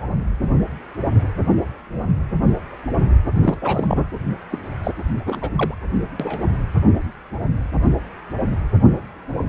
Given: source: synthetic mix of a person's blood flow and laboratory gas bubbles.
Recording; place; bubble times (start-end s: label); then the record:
Doppler ultrasound of blood flow; precordium
3.41-4.01 s: bubbles
4.51-4.59 s: bubbles
4.83-4.91 s: bubbles
5.25-5.49 s: bubbles
5.55-5.75 s: bubbles
6.19-6.50 s: bubbles
From the record:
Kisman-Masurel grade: 222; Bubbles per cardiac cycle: several, 3 to 8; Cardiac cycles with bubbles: 10 to 50%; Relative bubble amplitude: moderate (0.250 to 0.450); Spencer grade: 2 (many but less than half of the cardiac periods contain bubble signals, singularly or in groups); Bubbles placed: anywhere in the cardiac cycle